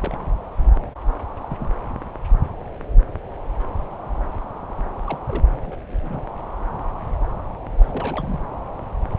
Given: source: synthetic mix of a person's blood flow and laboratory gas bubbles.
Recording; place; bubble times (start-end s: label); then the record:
Doppler ultrasound of blood flow; subclavian vein
0.00-0.18 s: bubbles
1.44-1.46 s: bubbles
1.49-1.70 s: bubbles
5.07-5.18 s: bubbles
5.27-5.46 s: bubbles
5.61-5.64 s: bubbles
5.67-5.79 s: bubbles
5.91-5.96 s: bubbles
6.03-6.21 s: bubbles
7.78-8.40 s: bubbles
From the record:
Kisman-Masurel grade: 221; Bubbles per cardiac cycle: several, 3 to 8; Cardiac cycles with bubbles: 10 to 50%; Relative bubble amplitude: barely perceptible (0.100 to 0.250); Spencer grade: 2 (many but less than half of the cardiac periods contain bubble signals, singularly or in groups); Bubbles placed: anywhere in the cardiac cycle